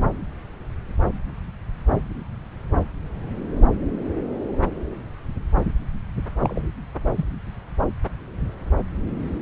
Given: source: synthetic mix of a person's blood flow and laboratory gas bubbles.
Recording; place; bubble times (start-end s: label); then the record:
Doppler ultrasound of blood flow; subclavian vein
6.40-6.61 s: bubbles
7.16-7.25 s: bubbles
From the record:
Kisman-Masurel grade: 112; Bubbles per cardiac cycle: 1 to 2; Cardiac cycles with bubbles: 1 to 10%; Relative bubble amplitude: moderate (0.250 to 0.450); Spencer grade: 1 (occasional bubble signal discernible with the cardiac motion signal, with majority of cardiac periods free of bubbles); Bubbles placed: anywhere in the cardiac cycle